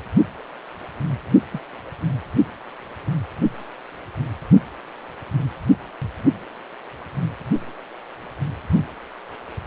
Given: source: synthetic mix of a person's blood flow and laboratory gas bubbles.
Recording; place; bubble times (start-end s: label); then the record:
Doppler ultrasound of blood flow; precordium
1.53-1.60 s: bubbles
From the record:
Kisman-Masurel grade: 111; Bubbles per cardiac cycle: 1 to 2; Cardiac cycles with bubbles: 1 to 10%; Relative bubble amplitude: barely perceptible (0.100 to 0.250); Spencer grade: 1 (occasional bubble signal discernible with the cardiac motion signal, with majority of cardiac periods free of bubbles); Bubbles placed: only in the low amplitude regions of the cardiac cycle